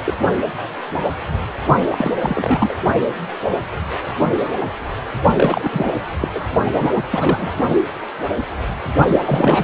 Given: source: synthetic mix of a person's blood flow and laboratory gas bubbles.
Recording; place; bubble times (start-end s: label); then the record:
Doppler ultrasound of blood flow; precordium
0.04-0.14 s: bubbles
1.91-2.10 s: bubbles
2.21-2.75 s: bubbles
5.34-5.94 s: bubbles
6.21-6.28 s: bubbles
6.34-6.45 s: bubbles
6.74-6.90 s: bubbles
6.94-7.03 s: bubbles
7.11-7.53 s: bubbles
9.07-9.64 s: bubbles
From the record:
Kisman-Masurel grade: 332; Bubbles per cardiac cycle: rolling drumbeat, 9 or more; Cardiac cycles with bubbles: 50 to 99%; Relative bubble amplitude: moderate (0.250 to 0.450); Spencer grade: 3 (all of the cardiac periods contain showers or single bubble signals, but not dominating or overriding the cardiac motion signals); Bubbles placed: only in the low amplitude regions of the cardiac cycle